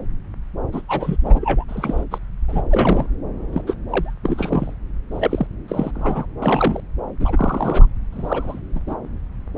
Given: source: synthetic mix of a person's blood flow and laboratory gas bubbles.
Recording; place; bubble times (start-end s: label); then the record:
Doppler ultrasound of blood flow; subclavian vein
0.72-0.82 s: bubbles
0.88-1.17 s: bubbles
1.23-1.64 s: bubbles
1.68-2.04 s: bubbles
2.11-2.18 s: bubbles
2.48-2.62 s: bubbles
2.70-3.06 s: bubbles
3.52-3.62 s: bubbles
3.67-3.75 s: bubbles
3.88-4.14 s: bubbles
4.23-4.74 s: bubbles
5.11-5.47 s: bubbles
5.68-5.91 s: bubbles
5.95-6.26 s: bubbles
6.42-6.80 s: bubbles
7.20-7.86 s: bubbles
8.12-8.59 s: bubbles
8.74-8.79 s: bubbles
8.86-8.95 s: bubbles
9.56-9.58 s: bubbles
From the record:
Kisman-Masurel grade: 242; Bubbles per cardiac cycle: several, 3 to 8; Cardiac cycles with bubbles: 100%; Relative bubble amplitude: moderate (0.250 to 0.450); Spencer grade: 3 (all of the cardiac periods contain showers or single bubble signals, but not dominating or overriding the cardiac motion signals); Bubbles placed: anywhere in the cardiac cycle